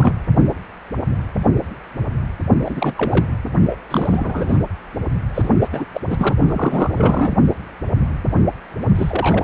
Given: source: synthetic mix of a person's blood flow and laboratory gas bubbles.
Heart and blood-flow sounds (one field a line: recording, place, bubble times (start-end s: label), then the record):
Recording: Doppler ultrasound of blood flow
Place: precordium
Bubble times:
0.00-0.15 s: bubbles
2.65-3.26 s: bubbles
3.70-3.76 s: bubbles
3.91-4.58 s: bubbles
5.34-5.49 s: bubbles
5.60-5.68 s: bubbles
5.72-5.85 s: bubbles
5.94-6.01 s: bubbles
6.10-6.37 s: bubbles
6.47-7.33 s: bubbles
8.95-9.44 s: bubbles
From the record:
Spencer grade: 3 (all of the cardiac periods contain showers or single bubble signals, but not dominating or overriding the cardiac motion signals)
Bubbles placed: only in the low amplitude regions of the cardiac cycle